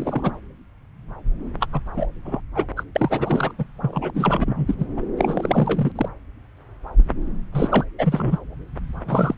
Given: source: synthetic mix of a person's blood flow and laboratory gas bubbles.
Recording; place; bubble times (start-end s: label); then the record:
Doppler ultrasound of blood flow; subclavian vein
0.00-0.32 s: bubbles
1.60-1.67 s: bubbles
1.72-1.81 s: bubbles
1.96-2.07 s: bubbles
2.25-2.41 s: bubbles
2.54-2.66 s: bubbles
2.76-2.83 s: bubbles
2.95-3.52 s: bubbles
3.58-3.65 s: bubbles
3.81-4.11 s: bubbles
4.14-4.75 s: bubbles
4.79-4.86 s: bubbles
4.97-5.02 s: bubbles
5.17-5.92 s: bubbles
5.95-6.09 s: bubbles
7.53-7.85 s: bubbles
7.98-8.39 s: bubbles
9.06-9.35 s: bubbles
From the record:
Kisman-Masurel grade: 332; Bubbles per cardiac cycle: rolling drumbeat, 9 or more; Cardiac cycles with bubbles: 50 to 99%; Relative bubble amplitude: moderate (0.250 to 0.450); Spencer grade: 3 (all of the cardiac periods contain showers or single bubble signals, but not dominating or overriding the cardiac motion signals); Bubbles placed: anywhere in the cardiac cycle